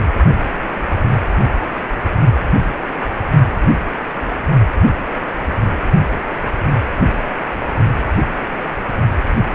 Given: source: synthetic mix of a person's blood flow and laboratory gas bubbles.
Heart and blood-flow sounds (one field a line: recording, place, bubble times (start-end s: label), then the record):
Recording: Doppler ultrasound of blood flow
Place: precordium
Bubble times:
9.53-9.55 s: bubbles
From the record:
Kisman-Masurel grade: 112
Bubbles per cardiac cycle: 1 to 2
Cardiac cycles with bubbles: 1 to 10%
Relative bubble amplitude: moderate (0.250 to 0.450)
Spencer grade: 1 (occasional bubble signal discernible with the cardiac motion signal, with majority of cardiac periods free of bubbles)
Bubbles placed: only in the low amplitude regions of the cardiac cycle